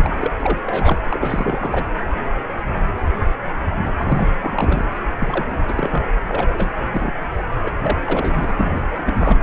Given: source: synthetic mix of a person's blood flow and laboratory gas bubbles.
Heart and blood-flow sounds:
Doppler ultrasound of blood flow; precordium
0.00-0.15 s: bubbles
0.21-0.32 s: bubbles
0.40-0.59 s: bubbles
0.66-0.98 s: bubbles
1.08-1.84 s: bubbles
3.98-4.29 s: bubbles
4.41-4.84 s: bubbles
5.20-5.57 s: bubbles
5.68-6.04 s: bubbles
6.26-6.57 s: bubbles
6.59-6.71 s: bubbles
6.91-7.13 s: bubbles
7.63-7.72 s: bubbles
7.82-7.96 s: bubbles
8.04-8.82 s: bubbles
8.94-8.99 s: bubbles
9.05-9.14 s: bubbles
9.20-9.38 s: bubbles
From the record:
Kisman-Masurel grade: 332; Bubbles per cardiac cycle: rolling drumbeat, 9 or more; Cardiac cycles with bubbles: 50 to 99%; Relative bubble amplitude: moderate (0.250 to 0.450); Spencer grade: 3 (all of the cardiac periods contain showers or single bubble signals, but not dominating or overriding the cardiac motion signals); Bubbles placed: anywhere in the cardiac cycle

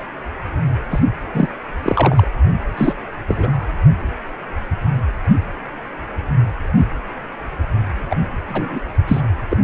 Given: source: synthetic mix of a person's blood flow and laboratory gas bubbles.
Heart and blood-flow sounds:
Doppler ultrasound of blood flow; precordium
0.90-0.99 s: bubbles
1.34-1.48 s: bubbles
1.83-2.26 s: bubbles
2.77-2.94 s: bubbles
3.28-3.66 s: bubbles
8.10-8.16 s: bubbles
8.48-8.80 s: bubbles
9.08-9.21 s: bubbles
9.50-9.57 s: bubbles
From the record:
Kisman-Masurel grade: 233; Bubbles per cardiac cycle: several, 3 to 8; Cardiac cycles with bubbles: 50 to 99%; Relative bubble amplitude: loud (0.450 to 0.775); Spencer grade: 3 (all of the cardiac periods contain showers or single bubble signals, but not dominating or overriding the cardiac motion signals); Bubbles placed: anywhere in the cardiac cycle

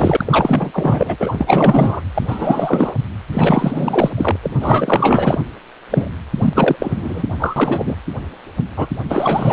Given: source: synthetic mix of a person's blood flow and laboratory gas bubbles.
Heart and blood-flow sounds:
Doppler ultrasound of blood flow; precordium
0.00-0.70 s: bubbles
0.73-1.17 s: bubbles
1.19-2.02 s: bubbles
2.15-2.94 s: bubbles
3.32-4.10 s: bubbles
4.17-4.37 s: bubbles
4.42-4.50 s: bubbles
4.60-5.39 s: bubbles
5.90-6.10 s: bubbles
6.38-6.76 s: bubbles
6.79-7.24 s: bubbles
7.39-7.96 s: bubbles
8.76-8.88 s: bubbles
9.08-9.53 s: bubbles
From the record:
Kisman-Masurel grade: 444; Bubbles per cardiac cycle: continuous sound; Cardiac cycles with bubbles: 100%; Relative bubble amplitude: maximal (0.775 to 0.999); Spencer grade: 4 (maximum detectable bubble signal sounding continuously throughout systole and diastole of every cardiac period, and overriding the amplitude of the normal cardiac signals); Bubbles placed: anywhere in the cardiac cycle

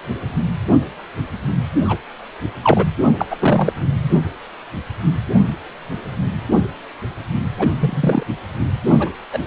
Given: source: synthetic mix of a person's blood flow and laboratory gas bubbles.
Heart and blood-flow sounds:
Doppler ultrasound of blood flow; precordium
1.84-1.97 s: bubbles
2.63-2.85 s: bubbles
3.19-3.27 s: bubbles
3.30-3.73 s: bubbles
7.59-7.71 s: bubbles
7.79-8.23 s: bubbles
8.88-9.09 s: bubbles
9.31-9.39 s: bubbles
From the record:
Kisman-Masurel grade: 223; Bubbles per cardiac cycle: several, 3 to 8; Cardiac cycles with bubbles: 10 to 50%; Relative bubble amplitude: loud (0.450 to 0.775); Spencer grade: 2 (many but less than half of the cardiac periods contain bubble signals, singularly or in groups); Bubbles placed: anywhere in the cardiac cycle

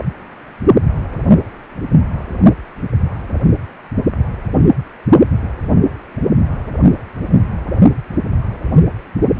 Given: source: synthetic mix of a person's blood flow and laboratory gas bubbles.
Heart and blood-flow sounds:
Doppler ultrasound of blood flow; precordium
0.00-0.04 s: bubbles
From the record:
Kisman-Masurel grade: 112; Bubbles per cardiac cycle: 1 to 2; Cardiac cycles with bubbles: 1 to 10%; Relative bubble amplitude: moderate (0.250 to 0.450); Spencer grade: 1 (occasional bubble signal discernible with the cardiac motion signal, with majority of cardiac periods free of bubbles); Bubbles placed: anywhere in the cardiac cycle

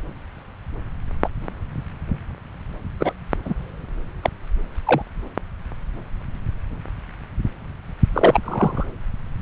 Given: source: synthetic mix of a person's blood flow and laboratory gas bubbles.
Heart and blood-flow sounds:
Doppler ultrasound of blood flow; subclavian vein
1.24-1.28 s: bubbles
3.00-3.13 s: bubbles
3.45-3.54 s: bubbles
4.23-4.30 s: bubbles
4.85-5.02 s: bubbles
8.13-8.39 s: bubbles
8.43-8.87 s: bubbles
From the record:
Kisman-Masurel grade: 123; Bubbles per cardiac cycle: 1 to 2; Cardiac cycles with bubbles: 10 to 50%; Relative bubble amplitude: loud (0.450 to 0.775); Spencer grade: 2 (many but less than half of the cardiac periods contain bubble signals, singularly or in groups); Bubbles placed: anywhere in the cardiac cycle

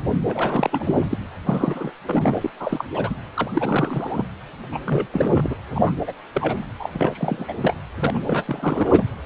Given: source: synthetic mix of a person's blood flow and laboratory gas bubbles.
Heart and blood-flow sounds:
Doppler ultrasound of blood flow; precordium
0.24-1.07 s: bubbles
1.09-1.18 s: bubbles
1.46-1.91 s: bubbles
2.05-2.50 s: bubbles
2.59-2.84 s: bubbles
2.94-3.15 s: bubbles
3.35-3.51 s: bubbles
3.53-4.25 s: bubbles
4.72-4.79 s: bubbles
4.85-5.06 s: bubbles
5.12-5.56 s: bubbles
5.73-5.93 s: bubbles
6.00-6.13 s: bubbles
6.34-6.66 s: bubbles
6.79-7.54 s: bubbles
7.62-7.75 s: bubbles
7.99-9.04 s: bubbles
From the record:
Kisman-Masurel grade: 342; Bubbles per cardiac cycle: rolling drumbeat, 9 or more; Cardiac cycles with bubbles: 100%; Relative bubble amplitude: moderate (0.250 to 0.450); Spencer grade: 3 (all of the cardiac periods contain showers or single bubble signals, but not dominating or overriding the cardiac motion signals); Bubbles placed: anywhere in the cardiac cycle

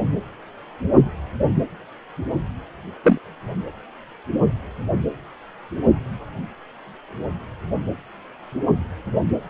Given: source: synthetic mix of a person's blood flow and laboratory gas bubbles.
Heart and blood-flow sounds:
Doppler ultrasound of blood flow; precordium
3.03-3.19 s: bubbles
From the record:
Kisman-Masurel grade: 113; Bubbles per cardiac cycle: 1 to 2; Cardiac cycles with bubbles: 1 to 10%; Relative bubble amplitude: loud (0.450 to 0.775); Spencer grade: 1 (occasional bubble signal discernible with the cardiac motion signal, with majority of cardiac periods free of bubbles); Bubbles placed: anywhere in the cardiac cycle

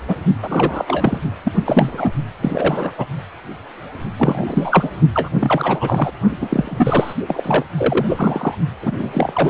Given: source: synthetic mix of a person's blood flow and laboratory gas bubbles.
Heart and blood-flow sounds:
Doppler ultrasound of blood flow; precordium
0.08-0.15 s: bubbles
0.42-1.18 s: bubbles
1.44-1.51 s: bubbles
1.54-2.11 s: bubbles
2.41-2.92 s: bubbles
2.98-3.05 s: bubbles
4.18-4.89 s: bubbles
5.14-5.29 s: bubbles
5.41-6.11 s: bubbles
6.41-7.14 s: bubbles
7.28-7.63 s: bubbles
7.77-8.06 s: bubbles
8.09-8.55 s: bubbles
8.81-8.91 s: bubbles
8.98-9.49 s: bubbles
From the record:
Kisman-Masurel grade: 333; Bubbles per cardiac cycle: rolling drumbeat, 9 or more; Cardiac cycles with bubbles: 50 to 99%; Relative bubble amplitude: loud (0.450 to 0.775); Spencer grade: 3 (all of the cardiac periods contain showers or single bubble signals, but not dominating or overriding the cardiac motion signals); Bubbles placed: only in the low amplitude regions of the cardiac cycle

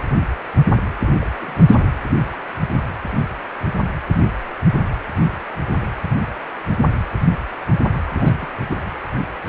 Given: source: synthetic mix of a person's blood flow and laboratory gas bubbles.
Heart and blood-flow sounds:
Doppler ultrasound of blood flow; precordium
1.02-1.12 s: bubbles
1.20-1.27 s: bubbles
1.32-1.54 s: bubbles
1.67-1.90 s: bubbles
8.07-8.47 s: bubbles
8.59-8.79 s: bubbles
From the record:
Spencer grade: 2 (many but less than half of the cardiac periods contain bubble signals, singularly or in groups); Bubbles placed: anywhere in the cardiac cycle

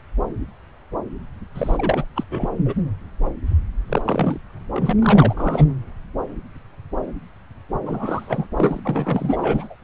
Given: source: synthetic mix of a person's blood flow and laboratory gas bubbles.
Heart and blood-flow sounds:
Doppler ultrasound of blood flow; subclavian vein
1.54-2.04 s: bubbles
2.15-2.24 s: bubbles
2.31-2.48 s: bubbles
2.65-2.75 s: bubbles
3.89-4.40 s: bubbles
4.73-4.93 s: bubbles
4.99-5.70 s: bubbles
7.86-8.47 s: bubbles
8.56-8.80 s: bubbles
8.84-9.75 s: bubbles
From the record:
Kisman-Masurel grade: 332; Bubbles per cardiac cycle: rolling drumbeat, 9 or more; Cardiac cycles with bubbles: 50 to 99%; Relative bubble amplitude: moderate (0.250 to 0.450); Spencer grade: 3 (all of the cardiac periods contain showers or single bubble signals, but not dominating or overriding the cardiac motion signals); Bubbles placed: anywhere in the cardiac cycle

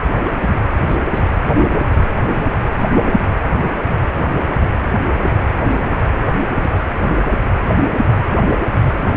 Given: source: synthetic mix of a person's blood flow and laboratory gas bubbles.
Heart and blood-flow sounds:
Doppler ultrasound of blood flow; precordium
0.26-0.50 s: bubbles
0.86-1.32 s: bubbles
2.25-2.85 s: bubbles
3.72-3.75 s: bubbles
3.78-3.82 s: bubbles
6.79-6.84 s: bubbles
7.16-7.28 s: bubbles
From the record:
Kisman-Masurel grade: 121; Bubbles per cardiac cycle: 1 to 2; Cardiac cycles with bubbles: 10 to 50%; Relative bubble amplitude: barely perceptible (0.100 to 0.250); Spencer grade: 2 (many but less than half of the cardiac periods contain bubble signals, singularly or in groups); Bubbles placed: anywhere in the cardiac cycle

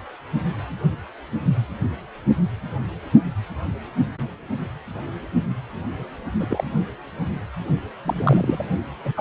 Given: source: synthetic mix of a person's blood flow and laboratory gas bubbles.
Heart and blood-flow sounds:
Doppler ultrasound of blood flow; precordium
6.39-6.46 s: bubbles
6.50-6.64 s: bubbles
8.04-8.65 s: bubbles
9.04-9.21 s: bubbles
From the record:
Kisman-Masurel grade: 212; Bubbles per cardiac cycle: several, 3 to 8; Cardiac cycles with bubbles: 1 to 10%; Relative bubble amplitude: moderate (0.250 to 0.450); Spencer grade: 1 (occasional bubble signal discernible with the cardiac motion signal, with majority of cardiac periods free of bubbles); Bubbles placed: only in the low amplitude regions of the cardiac cycle

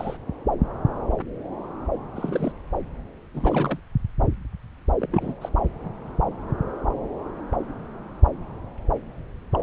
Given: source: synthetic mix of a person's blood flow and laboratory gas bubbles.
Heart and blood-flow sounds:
Doppler ultrasound of blood flow; subclavian vein
0.00-0.17 s: bubbles
2.15-2.52 s: bubbles
3.33-3.80 s: bubbles
4.99-5.09 s: bubbles
5.12-5.35 s: bubbles
5.41-5.49 s: bubbles
9.53-9.63 s: bubbles
From the record:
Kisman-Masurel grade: 221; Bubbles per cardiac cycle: several, 3 to 8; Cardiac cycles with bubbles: 10 to 50%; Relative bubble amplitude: barely perceptible (0.100 to 0.250); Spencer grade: 2 (many but less than half of the cardiac periods contain bubble signals, singularly or in groups); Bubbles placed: anywhere in the cardiac cycle

